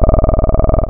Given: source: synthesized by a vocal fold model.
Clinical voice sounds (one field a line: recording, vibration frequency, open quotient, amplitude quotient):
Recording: sustained vowel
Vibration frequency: 20 Hz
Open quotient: 0.4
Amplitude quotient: 1.4